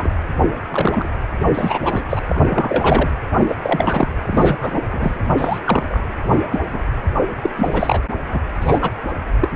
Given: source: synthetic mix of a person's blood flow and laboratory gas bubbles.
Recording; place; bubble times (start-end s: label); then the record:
Doppler ultrasound of blood flow; precordium
0.00-0.10 s: bubbles
0.70-1.09 s: bubbles
1.54-2.03 s: bubbles
2.09-2.21 s: bubbles
2.29-2.40 s: bubbles
2.50-3.14 s: bubbles
3.40-3.56 s: bubbles
3.62-4.08 s: bubbles
4.22-4.88 s: bubbles
4.92-5.17 s: bubbles
5.38-5.59 s: bubbles
5.66-6.00 s: bubbles
6.30-6.37 s: bubbles
6.51-6.59 s: bubbles
6.72-6.81 s: bubbles
7.42-7.50 s: bubbles
7.55-8.01 s: bubbles
8.33-8.40 s: bubbles
8.61-8.91 s: bubbles
9.40-9.49 s: bubbles
From the record:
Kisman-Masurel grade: 242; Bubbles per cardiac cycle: several, 3 to 8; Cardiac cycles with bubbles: 100%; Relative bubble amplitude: moderate (0.250 to 0.450); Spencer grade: 3 (all of the cardiac periods contain showers or single bubble signals, but not dominating or overriding the cardiac motion signals); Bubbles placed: anywhere in the cardiac cycle